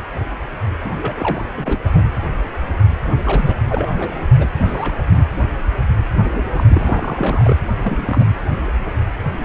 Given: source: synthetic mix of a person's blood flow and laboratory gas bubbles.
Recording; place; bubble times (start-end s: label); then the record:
Doppler ultrasound of blood flow; precordium
0.84-0.91 s: bubbles
1.01-1.45 s: bubbles
1.57-1.80 s: bubbles
1.84-1.89 s: bubbles
1.93-2.06 s: bubbles
3.06-3.18 s: bubbles
3.24-3.54 s: bubbles
3.69-3.88 s: bubbles
3.92-4.11 s: bubbles
4.37-4.46 s: bubbles
4.59-5.01 s: bubbles
6.54-6.63 s: bubbles
6.70-7.57 s: bubbles
7.84-8.27 s: bubbles
From the record:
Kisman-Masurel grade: 222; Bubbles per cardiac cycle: several, 3 to 8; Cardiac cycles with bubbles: 10 to 50%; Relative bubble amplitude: moderate (0.250 to 0.450); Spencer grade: 2 (many but less than half of the cardiac periods contain bubble signals, singularly or in groups); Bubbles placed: anywhere in the cardiac cycle